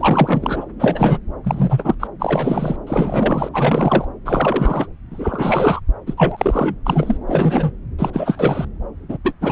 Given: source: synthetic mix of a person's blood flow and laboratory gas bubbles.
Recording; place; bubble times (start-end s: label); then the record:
Doppler ultrasound of blood flow; subclavian vein
0.00-0.65 s: bubbles
0.79-1.18 s: bubbles
1.44-1.95 s: bubbles
1.99-2.08 s: bubbles
2.19-2.76 s: bubbles
2.87-3.49 s: bubbles
3.53-4.05 s: bubbles
4.25-4.87 s: bubbles
5.11-5.80 s: bubbles
6.07-6.14 s: bubbles
6.17-6.75 s: bubbles
6.85-7.17 s: bubbles
7.27-7.72 s: bubbles
7.98-8.10 s: bubbles
8.13-8.65 s: bubbles
9.09-9.18 s: bubbles
9.24-9.33 s: bubbles
9.41-9.52 s: bubbles
From the record:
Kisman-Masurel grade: 343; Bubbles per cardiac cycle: rolling drumbeat, 9 or more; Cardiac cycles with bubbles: 100%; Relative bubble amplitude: loud (0.450 to 0.775); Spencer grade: 3 (all of the cardiac periods contain showers or single bubble signals, but not dominating or overriding the cardiac motion signals); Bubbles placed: anywhere in the cardiac cycle